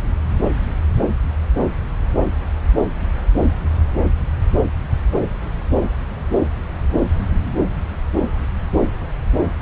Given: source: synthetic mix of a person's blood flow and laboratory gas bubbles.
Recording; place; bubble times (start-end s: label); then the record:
Doppler ultrasound of blood flow; subclavian vein
no bubbles
From the record:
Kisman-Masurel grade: 000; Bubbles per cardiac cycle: 0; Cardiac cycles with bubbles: 0%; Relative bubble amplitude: no bubbles discernible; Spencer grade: 0 (complete lack of bubble signals)